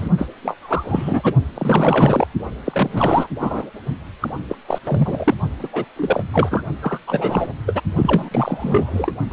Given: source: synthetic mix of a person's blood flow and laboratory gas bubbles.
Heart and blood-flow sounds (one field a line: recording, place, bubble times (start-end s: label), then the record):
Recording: Doppler ultrasound of blood flow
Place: precordium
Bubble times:
0.00-0.10 s: bubbles
0.17-0.28 s: bubbles
0.43-0.56 s: bubbles
0.60-1.35 s: bubbles
1.54-2.27 s: bubbles
2.65-3.27 s: bubbles
3.39-3.71 s: bubbles
4.21-4.30 s: bubbles
4.48-4.55 s: bubbles
4.67-4.78 s: bubbles
4.85-5.34 s: bubbles
5.59-5.68 s: bubbles
5.72-5.85 s: bubbles
5.96-6.23 s: bubbles
6.32-6.62 s: bubbles
6.81-6.99 s: bubbles
7.06-7.49 s: bubbles
7.66-7.82 s: bubbles
7.95-9.12 s: bubbles
9.30-9.33 s: bubbles
From the record:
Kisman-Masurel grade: 343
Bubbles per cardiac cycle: rolling drumbeat, 9 or more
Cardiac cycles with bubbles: 100%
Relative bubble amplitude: loud (0.450 to 0.775)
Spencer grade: 3 (all of the cardiac periods contain showers or single bubble signals, but not dominating or overriding the cardiac motion signals)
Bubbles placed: only in the low amplitude regions of the cardiac cycle